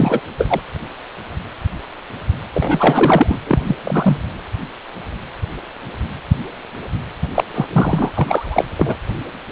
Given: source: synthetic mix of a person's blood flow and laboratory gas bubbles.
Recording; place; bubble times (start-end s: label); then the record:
Doppler ultrasound of blood flow; precordium
0.00-0.21 s: bubbles
0.37-0.60 s: bubbles
2.54-3.40 s: bubbles
3.47-3.59 s: bubbles
3.67-3.76 s: bubbles
3.84-4.17 s: bubbles
7.34-7.44 s: bubbles
7.54-7.67 s: bubbles
7.72-8.12 s: bubbles
8.15-8.65 s: bubbles
8.78-8.95 s: bubbles
From the record:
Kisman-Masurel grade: 233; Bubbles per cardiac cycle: several, 3 to 8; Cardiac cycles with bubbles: 50 to 99%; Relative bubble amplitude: loud (0.450 to 0.775); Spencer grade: 3 (all of the cardiac periods contain showers or single bubble signals, but not dominating or overriding the cardiac motion signals); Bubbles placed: anywhere in the cardiac cycle